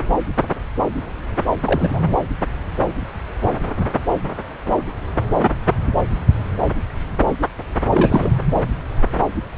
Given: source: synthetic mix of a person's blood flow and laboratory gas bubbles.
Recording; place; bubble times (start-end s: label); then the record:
Doppler ultrasound of blood flow; subclavian vein
1.65-2.00 s: bubbles
7.89-8.36 s: bubbles
From the record:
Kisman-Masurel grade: 222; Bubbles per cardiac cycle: several, 3 to 8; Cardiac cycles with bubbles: 10 to 50%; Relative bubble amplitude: moderate (0.250 to 0.450); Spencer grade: 2 (many but less than half of the cardiac periods contain bubble signals, singularly or in groups); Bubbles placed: anywhere in the cardiac cycle